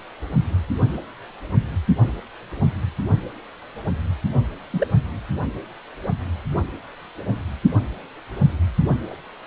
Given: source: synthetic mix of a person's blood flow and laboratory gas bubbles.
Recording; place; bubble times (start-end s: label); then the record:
Doppler ultrasound of blood flow; precordium
4.71-4.88 s: bubbles
From the record:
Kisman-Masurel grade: 121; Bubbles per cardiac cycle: 1 to 2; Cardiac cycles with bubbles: 10 to 50%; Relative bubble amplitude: barely perceptible (0.100 to 0.250); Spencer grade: 2 (many but less than half of the cardiac periods contain bubble signals, singularly or in groups); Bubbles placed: only in the low amplitude regions of the cardiac cycle